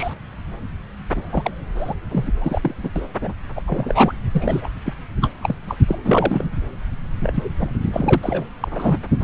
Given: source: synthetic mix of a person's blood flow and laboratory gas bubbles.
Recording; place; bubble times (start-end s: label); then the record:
Doppler ultrasound of blood flow; subclavian vein
0.00-0.13 s: bubbles
1.15-1.51 s: bubbles
1.75-1.95 s: bubbles
2.11-2.31 s: bubbles
2.41-2.75 s: bubbles
2.83-2.90 s: bubbles
2.96-3.06 s: bubbles
3.21-3.33 s: bubbles
3.56-3.62 s: bubbles
3.67-4.12 s: bubbles
4.33-4.67 s: bubbles
4.85-4.94 s: bubbles
5.21-5.31 s: bubbles
5.42-5.56 s: bubbles
5.68-5.77 s: bubbles
5.88-5.96 s: bubbles
6.04-6.50 s: bubbles
7.21-7.49 s: bubbles
7.58-7.71 s: bubbles
7.93-8.48 s: bubbles
8.62-8.68 s: bubbles
8.71-8.98 s: bubbles
9.20-9.24 s: bubbles
From the record:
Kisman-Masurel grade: 232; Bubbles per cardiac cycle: several, 3 to 8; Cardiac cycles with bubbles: 50 to 99%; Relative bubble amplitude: moderate (0.250 to 0.450); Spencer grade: 3 (all of the cardiac periods contain showers or single bubble signals, but not dominating or overriding the cardiac motion signals); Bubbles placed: anywhere in the cardiac cycle